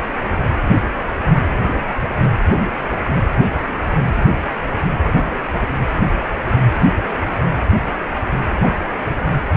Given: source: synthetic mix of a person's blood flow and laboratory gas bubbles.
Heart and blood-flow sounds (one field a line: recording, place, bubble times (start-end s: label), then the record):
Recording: Doppler ultrasound of blood flow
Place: precordium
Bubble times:
8.61-8.74 s: bubbles
From the record:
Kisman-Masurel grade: 113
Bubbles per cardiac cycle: 1 to 2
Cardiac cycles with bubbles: 1 to 10%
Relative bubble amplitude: loud (0.450 to 0.775)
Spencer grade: 1 (occasional bubble signal discernible with the cardiac motion signal, with majority of cardiac periods free of bubbles)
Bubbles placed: anywhere in the cardiac cycle